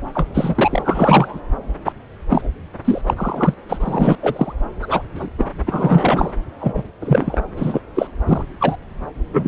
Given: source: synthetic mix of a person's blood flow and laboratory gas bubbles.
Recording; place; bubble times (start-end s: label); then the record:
Doppler ultrasound of blood flow; subclavian vein
0.14-1.40 s: bubbles
1.85-1.92 s: bubbles
2.29-2.48 s: bubbles
2.84-3.02 s: bubbles
3.06-3.14 s: bubbles
3.17-3.54 s: bubbles
3.69-4.16 s: bubbles
4.21-4.53 s: bubbles
4.82-5.07 s: bubbles
5.15-5.29 s: bubbles
5.38-5.45 s: bubbles
5.67-6.33 s: bubbles
6.61-6.83 s: bubbles
7.01-7.37 s: bubbles
7.57-7.81 s: bubbles
7.95-8.07 s: bubbles
8.29-8.43 s: bubbles
8.60-8.75 s: bubbles
9.33-9.48 s: bubbles
From the record:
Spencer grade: 3 (all of the cardiac periods contain showers or single bubble signals, but not dominating or overriding the cardiac motion signals); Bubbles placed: anywhere in the cardiac cycle